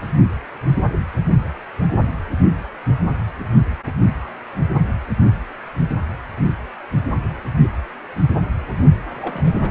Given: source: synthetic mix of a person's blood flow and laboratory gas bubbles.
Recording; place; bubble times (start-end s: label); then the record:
Doppler ultrasound of blood flow; precordium
9.21-9.71 s: bubbles
From the record:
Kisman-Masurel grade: 221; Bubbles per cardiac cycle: several, 3 to 8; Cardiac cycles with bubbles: 10 to 50%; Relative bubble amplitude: barely perceptible (0.100 to 0.250); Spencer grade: 2 (many but less than half of the cardiac periods contain bubble signals, singularly or in groups); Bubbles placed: only in the low amplitude regions of the cardiac cycle